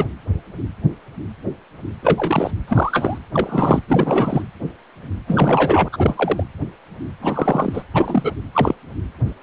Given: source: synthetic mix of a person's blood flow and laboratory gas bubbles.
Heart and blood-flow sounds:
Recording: Doppler ultrasound of blood flow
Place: precordium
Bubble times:
0.00-0.07 s: bubbles
2.02-2.51 s: bubbles
2.67-3.18 s: bubbles
3.33-3.81 s: bubbles
3.88-4.42 s: bubbles
5.28-5.88 s: bubbles
5.92-6.44 s: bubbles
7.21-7.83 s: bubbles
7.94-8.32 s: bubbles
8.53-8.75 s: bubbles
From the record:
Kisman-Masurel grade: 233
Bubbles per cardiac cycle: several, 3 to 8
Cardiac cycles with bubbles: 50 to 99%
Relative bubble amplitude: loud (0.450 to 0.775)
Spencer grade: 3 (all of the cardiac periods contain showers or single bubble signals, but not dominating or overriding the cardiac motion signals)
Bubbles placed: anywhere in the cardiac cycle

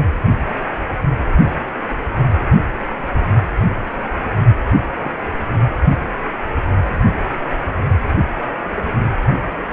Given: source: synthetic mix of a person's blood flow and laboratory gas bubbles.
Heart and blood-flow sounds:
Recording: Doppler ultrasound of blood flow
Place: precordium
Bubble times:
5.04-5.10 s: bubbles
From the record:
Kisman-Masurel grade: 112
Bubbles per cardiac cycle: 1 to 2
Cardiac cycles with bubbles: 1 to 10%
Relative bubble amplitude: moderate (0.250 to 0.450)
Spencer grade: 1 (occasional bubble signal discernible with the cardiac motion signal, with majority of cardiac periods free of bubbles)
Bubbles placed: only in the low amplitude regions of the cardiac cycle

